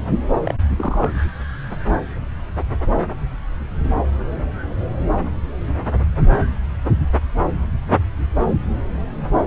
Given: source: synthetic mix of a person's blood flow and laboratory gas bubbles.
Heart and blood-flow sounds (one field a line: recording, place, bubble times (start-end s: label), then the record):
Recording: Doppler ultrasound of blood flow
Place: subclavian vein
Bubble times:
0.43-0.55 s: bubbles
0.77-1.10 s: bubbles
From the record:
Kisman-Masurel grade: 112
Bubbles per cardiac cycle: 1 to 2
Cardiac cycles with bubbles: 1 to 10%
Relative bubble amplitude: moderate (0.250 to 0.450)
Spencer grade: 1 (occasional bubble signal discernible with the cardiac motion signal, with majority of cardiac periods free of bubbles)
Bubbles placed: anywhere in the cardiac cycle